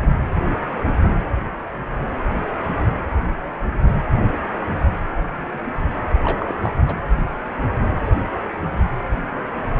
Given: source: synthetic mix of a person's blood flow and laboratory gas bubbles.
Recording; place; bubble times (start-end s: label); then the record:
Doppler ultrasound of blood flow; precordium
0.00-0.12 s: bubbles
6.22-6.54 s: bubbles
6.64-6.71 s: bubbles
6.86-6.96 s: bubbles
From the record:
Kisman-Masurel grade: 221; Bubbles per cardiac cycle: several, 3 to 8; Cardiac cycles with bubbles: 10 to 50%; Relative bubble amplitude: barely perceptible (0.100 to 0.250); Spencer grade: 2 (many but less than half of the cardiac periods contain bubble signals, singularly or in groups); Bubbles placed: anywhere in the cardiac cycle